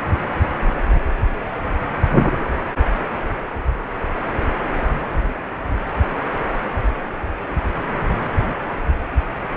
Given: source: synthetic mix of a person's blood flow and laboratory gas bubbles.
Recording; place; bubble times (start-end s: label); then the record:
Doppler ultrasound of blood flow; precordium
no bubbles
From the record:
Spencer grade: 0 (complete lack of bubble signals)